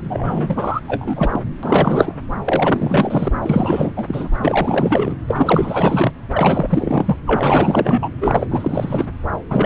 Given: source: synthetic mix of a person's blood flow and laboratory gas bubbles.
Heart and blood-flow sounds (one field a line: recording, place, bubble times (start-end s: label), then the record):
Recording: Doppler ultrasound of blood flow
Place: subclavian vein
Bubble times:
0.03-0.80 s: bubbles
0.88-1.41 s: bubbles
1.62-2.15 s: bubbles
2.44-3.32 s: bubbles
3.42-3.93 s: bubbles
3.96-4.29 s: bubbles
4.42-5.17 s: bubbles
5.28-6.12 s: bubbles
6.33-7.17 s: bubbles
7.26-8.09 s: bubbles
8.21-8.46 s: bubbles
8.49-9.05 s: bubbles
9.49-9.66 s: bubbles
From the record:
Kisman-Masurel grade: 444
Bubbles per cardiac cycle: continuous sound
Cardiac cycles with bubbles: 100%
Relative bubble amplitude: maximal (0.775 to 0.999)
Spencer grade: 4 (maximum detectable bubble signal sounding continuously throughout systole and diastole of every cardiac period, and overriding the amplitude of the normal cardiac signals)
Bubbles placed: anywhere in the cardiac cycle